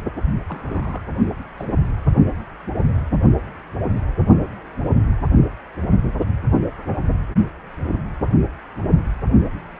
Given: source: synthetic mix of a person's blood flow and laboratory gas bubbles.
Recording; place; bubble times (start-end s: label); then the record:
Doppler ultrasound of blood flow; precordium
0.48-1.01 s: bubbles
1.30-1.35 s: bubbles
1.57-1.65 s: bubbles
1.88-1.96 s: bubbles
From the record:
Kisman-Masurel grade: 211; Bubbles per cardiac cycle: several, 3 to 8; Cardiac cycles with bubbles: 1 to 10%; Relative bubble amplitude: barely perceptible (0.100 to 0.250); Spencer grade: 1 (occasional bubble signal discernible with the cardiac motion signal, with majority of cardiac periods free of bubbles); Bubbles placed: only in the low amplitude regions of the cardiac cycle